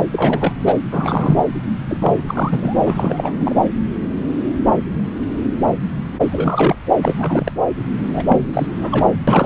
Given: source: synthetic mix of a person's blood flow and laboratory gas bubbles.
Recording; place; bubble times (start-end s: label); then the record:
Doppler ultrasound of blood flow; subclavian vein
0.00-0.04 s: bubbles
0.11-0.54 s: bubbles
0.65-0.74 s: bubbles
0.92-1.43 s: bubbles
1.89-2.23 s: bubbles
2.26-2.78 s: bubbles
2.86-3.56 s: bubbles
6.32-6.76 s: bubbles
7.02-7.52 s: bubbles
8.13-8.23 s: bubbles
8.29-8.45 s: bubbles
8.54-8.68 s: bubbles
8.74-9.10 s: bubbles
9.27-9.46 s: bubbles
From the record:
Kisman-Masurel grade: 332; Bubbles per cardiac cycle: rolling drumbeat, 9 or more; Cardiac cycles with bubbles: 50 to 99%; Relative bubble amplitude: moderate (0.250 to 0.450); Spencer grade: 3 (all of the cardiac periods contain showers or single bubble signals, but not dominating or overriding the cardiac motion signals); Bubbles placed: anywhere in the cardiac cycle